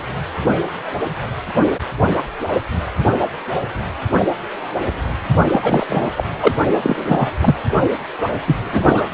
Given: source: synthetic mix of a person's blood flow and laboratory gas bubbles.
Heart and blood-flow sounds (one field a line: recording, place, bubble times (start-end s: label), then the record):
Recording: Doppler ultrasound of blood flow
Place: precordium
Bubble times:
5.51-5.86 s: bubbles
5.89-6.09 s: bubbles
6.17-6.24 s: bubbles
6.40-6.51 s: bubbles
6.82-7.31 s: bubbles
7.40-7.55 s: bubbles
8.47-8.56 s: bubbles
8.71-9.05 s: bubbles
From the record:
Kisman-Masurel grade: 223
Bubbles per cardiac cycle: several, 3 to 8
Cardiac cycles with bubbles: 10 to 50%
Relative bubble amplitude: loud (0.450 to 0.775)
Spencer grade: 2 (many but less than half of the cardiac periods contain bubble signals, singularly or in groups)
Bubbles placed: only in the low amplitude regions of the cardiac cycle